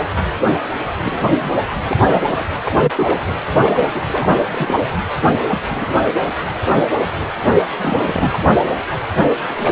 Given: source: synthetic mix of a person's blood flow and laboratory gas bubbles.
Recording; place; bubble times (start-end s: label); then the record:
Doppler ultrasound of blood flow; precordium
1.02-1.51 s: bubbles
1.87-1.97 s: bubbles
2.10-2.45 s: bubbles
2.63-2.92 s: bubbles
2.97-3.15 s: bubbles
3.26-3.35 s: bubbles
3.63-4.33 s: bubbles
4.52-4.76 s: bubbles
5.50-5.58 s: bubbles
5.70-6.02 s: bubbles
7.75-8.40 s: bubbles
9.56-9.72 s: bubbles
From the record:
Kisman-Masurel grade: 232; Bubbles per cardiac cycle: several, 3 to 8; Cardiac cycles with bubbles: 50 to 99%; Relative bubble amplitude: moderate (0.250 to 0.450); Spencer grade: 3 (all of the cardiac periods contain showers or single bubble signals, but not dominating or overriding the cardiac motion signals); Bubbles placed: anywhere in the cardiac cycle